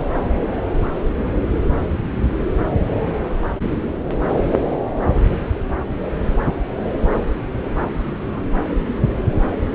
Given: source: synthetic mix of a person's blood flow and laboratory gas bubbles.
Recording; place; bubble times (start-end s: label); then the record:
Doppler ultrasound of blood flow; subclavian vein
5.12-5.22 s: bubbles
8.10-8.43 s: bubbles
From the record:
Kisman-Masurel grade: 121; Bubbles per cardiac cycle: 1 to 2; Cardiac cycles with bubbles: 10 to 50%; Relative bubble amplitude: barely perceptible (0.100 to 0.250); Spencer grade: 2 (many but less than half of the cardiac periods contain bubble signals, singularly or in groups); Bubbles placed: anywhere in the cardiac cycle